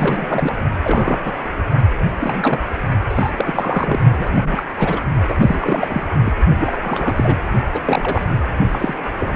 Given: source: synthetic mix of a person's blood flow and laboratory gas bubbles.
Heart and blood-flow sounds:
Doppler ultrasound of blood flow; precordium
0.00-0.56 s: bubbles
0.84-1.19 s: bubbles
1.24-1.33 s: bubbles
2.19-2.60 s: bubbles
3.10-4.00 s: bubbles
4.12-4.64 s: bubbles
4.78-5.01 s: bubbles
5.28-5.34 s: bubbles
5.38-6.07 s: bubbles
6.24-6.32 s: bubbles
6.58-7.38 s: bubbles
7.73-7.80 s: bubbles
7.85-8.33 s: bubbles
8.72-8.94 s: bubbles
9.18-9.36 s: bubbles
From the record:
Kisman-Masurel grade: 342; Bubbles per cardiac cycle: rolling drumbeat, 9 or more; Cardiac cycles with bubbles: 100%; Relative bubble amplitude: moderate (0.250 to 0.450); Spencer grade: 3 (all of the cardiac periods contain showers or single bubble signals, but not dominating or overriding the cardiac motion signals); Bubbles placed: only in the low amplitude regions of the cardiac cycle

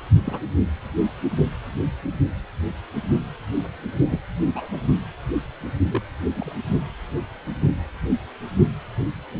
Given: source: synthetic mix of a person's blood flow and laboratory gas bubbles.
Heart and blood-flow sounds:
Doppler ultrasound of blood flow; precordium
0.25-0.41 s: bubbles
4.08-4.21 s: bubbles
4.54-4.77 s: bubbles
5.89-6.02 s: bubbles
6.35-6.53 s: bubbles
From the record:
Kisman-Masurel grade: 121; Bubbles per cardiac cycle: 1 to 2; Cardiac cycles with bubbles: 10 to 50%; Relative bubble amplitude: barely perceptible (0.100 to 0.250); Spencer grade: 2 (many but less than half of the cardiac periods contain bubble signals, singularly or in groups); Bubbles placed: only in the low amplitude regions of the cardiac cycle

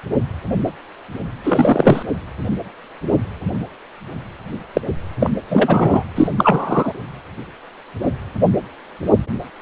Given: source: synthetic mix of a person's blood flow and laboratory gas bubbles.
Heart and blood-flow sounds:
Doppler ultrasound of blood flow; precordium
1.43-2.03 s: bubbles
4.73-4.81 s: bubbles
5.20-5.30 s: bubbles
5.50-6.04 s: bubbles
6.15-6.28 s: bubbles
6.38-6.93 s: bubbles
From the record:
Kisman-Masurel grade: 223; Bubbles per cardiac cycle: several, 3 to 8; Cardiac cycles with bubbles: 10 to 50%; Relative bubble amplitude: loud (0.450 to 0.775); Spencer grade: 2 (many but less than half of the cardiac periods contain bubble signals, singularly or in groups); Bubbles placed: anywhere in the cardiac cycle

